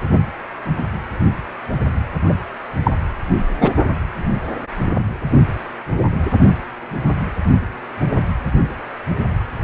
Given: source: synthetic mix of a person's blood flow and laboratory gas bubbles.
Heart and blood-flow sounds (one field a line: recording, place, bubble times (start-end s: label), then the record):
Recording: Doppler ultrasound of blood flow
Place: precordium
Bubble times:
2.29-2.33 s: bubbles
2.83-2.92 s: bubbles
3.60-3.73 s: bubbles
From the record:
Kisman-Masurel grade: 123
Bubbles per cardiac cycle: 1 to 2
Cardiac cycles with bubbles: 10 to 50%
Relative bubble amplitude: loud (0.450 to 0.775)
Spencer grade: 2 (many but less than half of the cardiac periods contain bubble signals, singularly or in groups)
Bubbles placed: anywhere in the cardiac cycle